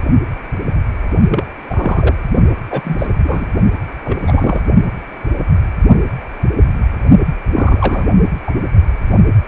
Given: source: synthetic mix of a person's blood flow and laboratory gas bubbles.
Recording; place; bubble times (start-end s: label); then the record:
Doppler ultrasound of blood flow; precordium
1.31-1.44 s: bubbles
1.69-2.15 s: bubbles
2.70-3.07 s: bubbles
3.23-3.46 s: bubbles
4.04-4.20 s: bubbles
4.23-4.62 s: bubbles
7.54-8.12 s: bubbles
8.46-8.51 s: bubbles
From the record:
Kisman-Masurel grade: 222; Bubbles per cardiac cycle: several, 3 to 8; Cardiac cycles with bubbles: 10 to 50%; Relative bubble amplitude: moderate (0.250 to 0.450); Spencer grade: 2 (many but less than half of the cardiac periods contain bubble signals, singularly or in groups); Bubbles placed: only in the low amplitude regions of the cardiac cycle